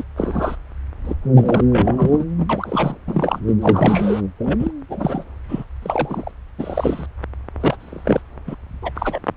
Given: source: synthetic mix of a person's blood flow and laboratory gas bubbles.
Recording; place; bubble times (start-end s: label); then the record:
Doppler ultrasound of blood flow; subclavian vein
0.00-0.03 s: bubbles
0.17-0.56 s: bubbles
1.04-1.14 s: bubbles
1.33-1.65 s: bubbles
1.71-2.25 s: bubbles
2.38-2.46 s: bubbles
2.49-2.98 s: bubbles
3.06-3.41 s: bubbles
3.48-3.53 s: bubbles
3.61-4.21 s: bubbles
4.38-4.71 s: bubbles
4.89-5.23 s: bubbles
5.48-5.64 s: bubbles
5.82-6.31 s: bubbles
6.58-7.06 s: bubbles
7.61-7.76 s: bubbles
7.79-8.22 s: bubbles
8.47-8.55 s: bubbles
8.82-8.91 s: bubbles
8.95-9.19 s: bubbles
From the record:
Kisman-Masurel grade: 232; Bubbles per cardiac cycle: several, 3 to 8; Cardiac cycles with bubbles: 50 to 99%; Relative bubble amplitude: moderate (0.250 to 0.450); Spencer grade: 3 (all of the cardiac periods contain showers or single bubble signals, but not dominating or overriding the cardiac motion signals); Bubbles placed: anywhere in the cardiac cycle